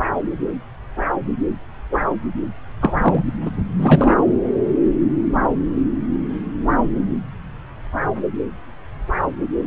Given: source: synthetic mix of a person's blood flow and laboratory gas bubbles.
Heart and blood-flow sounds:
Doppler ultrasound of blood flow; subclavian vein
2.82-2.97 s: bubbles
3.03-3.24 s: bubbles
3.46-3.51 s: bubbles
3.78-4.17 s: bubbles
From the record:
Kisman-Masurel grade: 213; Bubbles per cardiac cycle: several, 3 to 8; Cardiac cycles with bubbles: 1 to 10%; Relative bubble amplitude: loud (0.450 to 0.775); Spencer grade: 1 (occasional bubble signal discernible with the cardiac motion signal, with majority of cardiac periods free of bubbles); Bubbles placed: anywhere in the cardiac cycle

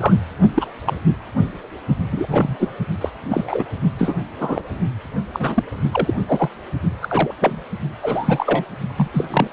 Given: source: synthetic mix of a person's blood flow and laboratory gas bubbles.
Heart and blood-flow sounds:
Doppler ultrasound of blood flow; precordium
0.00-0.14 s: bubbles
0.55-0.65 s: bubbles
0.86-0.98 s: bubbles
2.12-2.56 s: bubbles
2.60-2.69 s: bubbles
3.01-3.10 s: bubbles
3.30-3.64 s: bubbles
3.98-4.17 s: bubbles
4.40-4.62 s: bubbles
5.33-5.63 s: bubbles
5.92-6.14 s: bubbles
6.27-6.50 s: bubbles
7.02-7.34 s: bubbles
7.41-7.62 s: bubbles
8.02-8.64 s: bubbles
8.96-9.07 s: bubbles
9.12-9.47 s: bubbles
From the record:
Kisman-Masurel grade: 242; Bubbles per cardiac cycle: several, 3 to 8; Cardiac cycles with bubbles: 100%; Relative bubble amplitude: moderate (0.250 to 0.450); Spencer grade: 3 (all of the cardiac periods contain showers or single bubble signals, but not dominating or overriding the cardiac motion signals); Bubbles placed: only in the low amplitude regions of the cardiac cycle

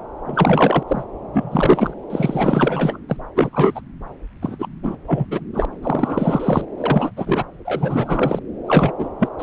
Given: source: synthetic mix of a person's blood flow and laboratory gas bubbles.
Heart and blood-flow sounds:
Doppler ultrasound of blood flow; subclavian vein
0.27-0.83 s: bubbles
0.87-1.04 s: bubbles
1.33-1.94 s: bubbles
2.10-2.99 s: bubbles
3.08-3.17 s: bubbles
3.36-3.50 s: bubbles
3.52-3.81 s: bubbles
4.42-4.56 s: bubbles
4.59-4.67 s: bubbles
4.83-4.96 s: bubbles
5.07-5.25 s: bubbles
5.31-5.40 s: bubbles
5.54-5.65 s: bubbles
5.82-6.65 s: bubbles
6.77-7.11 s: bubbles
7.16-7.43 s: bubbles
7.64-8.39 s: bubbles
8.66-8.91 s: bubbles
8.98-9.09 s: bubbles
9.20-9.29 s: bubbles
9.38-9.43 s: bubbles
From the record:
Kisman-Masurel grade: 343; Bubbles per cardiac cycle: rolling drumbeat, 9 or more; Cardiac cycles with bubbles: 100%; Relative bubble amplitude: loud (0.450 to 0.775); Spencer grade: 3 (all of the cardiac periods contain showers or single bubble signals, but not dominating or overriding the cardiac motion signals); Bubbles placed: anywhere in the cardiac cycle

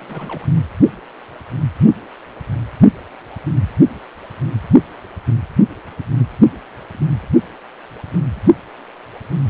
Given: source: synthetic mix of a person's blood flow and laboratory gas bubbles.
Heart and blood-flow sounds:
Doppler ultrasound of blood flow; precordium
0.00-0.50 s: bubbles
From the record:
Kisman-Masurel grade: 211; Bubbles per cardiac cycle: several, 3 to 8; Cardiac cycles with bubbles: 1 to 10%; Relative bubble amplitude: barely perceptible (0.100 to 0.250); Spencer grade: 1 (occasional bubble signal discernible with the cardiac motion signal, with majority of cardiac periods free of bubbles); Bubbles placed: anywhere in the cardiac cycle

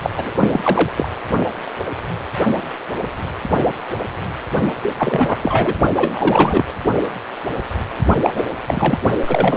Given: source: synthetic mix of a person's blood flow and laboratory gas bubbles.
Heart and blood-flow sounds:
Doppler ultrasound of blood flow; precordium
0.02-0.10 s: bubbles
0.16-0.31 s: bubbles
0.40-0.49 s: bubbles
0.53-0.93 s: bubbles
0.97-1.08 s: bubbles
4.98-5.74 s: bubbles
5.96-6.65 s: bubbles
8.22-8.43 s: bubbles
8.67-9.02 s: bubbles
9.27-9.57 s: bubbles
From the record:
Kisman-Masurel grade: 233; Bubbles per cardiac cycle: several, 3 to 8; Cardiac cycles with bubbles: 50 to 99%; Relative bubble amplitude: loud (0.450 to 0.775); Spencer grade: 3 (all of the cardiac periods contain showers or single bubble signals, but not dominating or overriding the cardiac motion signals); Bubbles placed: only in the low amplitude regions of the cardiac cycle

